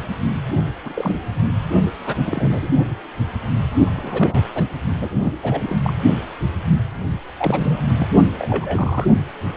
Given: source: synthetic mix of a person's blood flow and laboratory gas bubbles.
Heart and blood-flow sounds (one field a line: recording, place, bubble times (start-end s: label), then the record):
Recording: Doppler ultrasound of blood flow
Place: precordium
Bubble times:
0.84-1.17 s: bubbles
2.06-2.15 s: bubbles
2.18-2.67 s: bubbles
3.86-3.92 s: bubbles
3.95-4.44 s: bubbles
4.54-4.69 s: bubbles
5.00-5.32 s: bubbles
5.43-5.79 s: bubbles
5.82-5.93 s: bubbles
7.38-7.81 s: bubbles
7.99-8.08 s: bubbles
8.29-9.05 s: bubbles
From the record:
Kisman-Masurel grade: 222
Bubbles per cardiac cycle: several, 3 to 8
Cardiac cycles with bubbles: 10 to 50%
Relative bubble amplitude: moderate (0.250 to 0.450)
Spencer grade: 2 (many but less than half of the cardiac periods contain bubble signals, singularly or in groups)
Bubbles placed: only in the low amplitude regions of the cardiac cycle